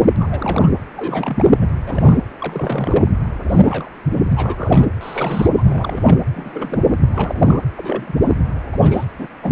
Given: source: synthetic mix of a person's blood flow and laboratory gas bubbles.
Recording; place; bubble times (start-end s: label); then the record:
Doppler ultrasound of blood flow; precordium
0.00-0.17 s: bubbles
0.19-0.71 s: bubbles
0.97-1.66 s: bubbles
1.75-1.79 s: bubbles
1.85-2.19 s: bubbles
2.39-3.11 s: bubbles
3.44-3.90 s: bubbles
4.09-4.33 s: bubbles
4.35-4.89 s: bubbles
5.00-6.18 s: bubbles
6.34-6.99 s: bubbles
7.12-7.62 s: bubbles
7.77-8.37 s: bubbles
8.72-8.77 s: bubbles
8.81-9.05 s: bubbles
9.17-9.28 s: bubbles
9.42-9.52 s: bubbles
From the record:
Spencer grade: 3 (all of the cardiac periods contain showers or single bubble signals, but not dominating or overriding the cardiac motion signals); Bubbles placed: anywhere in the cardiac cycle